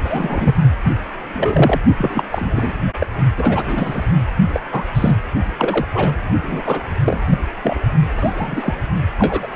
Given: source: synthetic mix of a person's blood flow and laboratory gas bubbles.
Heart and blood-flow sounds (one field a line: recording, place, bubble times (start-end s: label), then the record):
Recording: Doppler ultrasound of blood flow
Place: precordium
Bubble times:
0.04-0.56 s: bubbles
1.33-1.80 s: bubbles
1.98-2.23 s: bubbles
2.31-2.73 s: bubbles
3.00-3.06 s: bubbles
3.36-4.06 s: bubbles
4.53-4.60 s: bubbles
4.71-4.83 s: bubbles
4.94-5.19 s: bubbles
5.58-5.86 s: bubbles
5.92-6.13 s: bubbles
6.43-6.83 s: bubbles
7.04-7.22 s: bubbles
7.29-7.39 s: bubbles
7.62-7.79 s: bubbles
8.16-8.74 s: bubbles
9.18-9.47 s: bubbles
From the record:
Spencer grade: 3 (all of the cardiac periods contain showers or single bubble signals, but not dominating or overriding the cardiac motion signals)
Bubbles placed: only in the low amplitude regions of the cardiac cycle